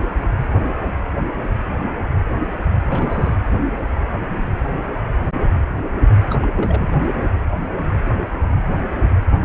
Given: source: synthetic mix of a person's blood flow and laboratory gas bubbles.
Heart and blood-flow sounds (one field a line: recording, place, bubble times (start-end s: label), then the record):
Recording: Doppler ultrasound of blood flow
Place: precordium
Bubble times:
2.83-3.34 s: bubbles
6.30-6.37 s: bubbles
6.42-6.46 s: bubbles
6.53-6.96 s: bubbles
From the record:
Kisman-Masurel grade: 211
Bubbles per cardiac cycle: several, 3 to 8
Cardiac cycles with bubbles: 1 to 10%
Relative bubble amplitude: barely perceptible (0.100 to 0.250)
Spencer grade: 1 (occasional bubble signal discernible with the cardiac motion signal, with majority of cardiac periods free of bubbles)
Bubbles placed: anywhere in the cardiac cycle